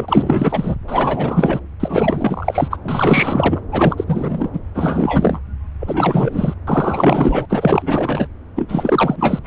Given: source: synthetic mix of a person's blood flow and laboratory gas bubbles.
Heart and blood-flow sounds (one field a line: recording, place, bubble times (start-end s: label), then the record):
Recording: Doppler ultrasound of blood flow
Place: subclavian vein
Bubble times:
0.00-0.76 s: bubbles
0.87-1.59 s: bubbles
1.80-2.76 s: bubbles
2.84-3.61 s: bubbles
3.71-4.04 s: bubbles
4.06-4.50 s: bubbles
4.53-4.59 s: bubbles
4.75-5.39 s: bubbles
5.80-6.54 s: bubbles
6.67-7.46 s: bubbles
7.49-8.28 s: bubbles
8.55-9.39 s: bubbles
9.44-9.47 s: bubbles
From the record:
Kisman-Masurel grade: 444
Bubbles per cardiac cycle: continuous sound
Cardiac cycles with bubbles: 100%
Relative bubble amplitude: maximal (0.775 to 0.999)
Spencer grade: 4 (maximum detectable bubble signal sounding continuously throughout systole and diastole of every cardiac period, and overriding the amplitude of the normal cardiac signals)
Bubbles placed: anywhere in the cardiac cycle